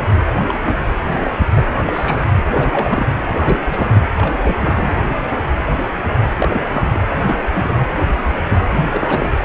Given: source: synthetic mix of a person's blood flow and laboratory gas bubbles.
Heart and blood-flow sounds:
Doppler ultrasound of blood flow; precordium
0.00-0.07 s: bubbles
0.21-0.26 s: bubbles
0.47-0.59 s: bubbles
0.65-0.85 s: bubbles
1.04-1.66 s: bubbles
1.77-2.42 s: bubbles
2.51-3.06 s: bubbles
3.38-4.00 s: bubbles
4.17-4.34 s: bubbles
4.42-4.56 s: bubbles
4.60-4.97 s: bubbles
6.38-7.00 s: bubbles
7.09-7.38 s: bubbles
7.53-7.74 s: bubbles
8.00-8.08 s: bubbles
8.50-8.67 s: bubbles
8.90-9.31 s: bubbles
9.41-9.44 s: bubbles
From the record:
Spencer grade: 3 (all of the cardiac periods contain showers or single bubble signals, but not dominating or overriding the cardiac motion signals); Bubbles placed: anywhere in the cardiac cycle

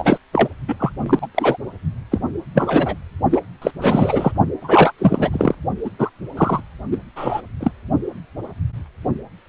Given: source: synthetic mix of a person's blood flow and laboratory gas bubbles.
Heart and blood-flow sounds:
Doppler ultrasound of blood flow; precordium
0.00-0.18 s: bubbles
0.32-0.48 s: bubbles
0.68-0.76 s: bubbles
0.80-0.92 s: bubbles
1.06-1.27 s: bubbles
1.34-1.57 s: bubbles
2.12-2.20 s: bubbles
2.55-2.96 s: bubbles
3.31-3.41 s: bubbles
3.62-3.71 s: bubbles
3.81-4.32 s: bubbles
4.62-4.92 s: bubbles
4.98-5.54 s: bubbles
5.85-5.90 s: bubbles
5.99-6.10 s: bubbles
6.37-6.61 s: bubbles
6.91-6.98 s: bubbles
7.16-7.41 s: bubbles
7.61-7.71 s: bubbles
From the record:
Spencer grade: 3 (all of the cardiac periods contain showers or single bubble signals, but not dominating or overriding the cardiac motion signals); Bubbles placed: only in the low amplitude regions of the cardiac cycle

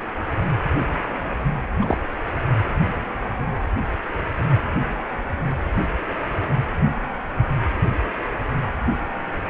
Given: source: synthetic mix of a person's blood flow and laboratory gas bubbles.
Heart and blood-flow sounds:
Doppler ultrasound of blood flow; precordium
1.81-1.98 s: bubbles
From the record:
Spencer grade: 1 (occasional bubble signal discernible with the cardiac motion signal, with majority of cardiac periods free of bubbles); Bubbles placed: anywhere in the cardiac cycle

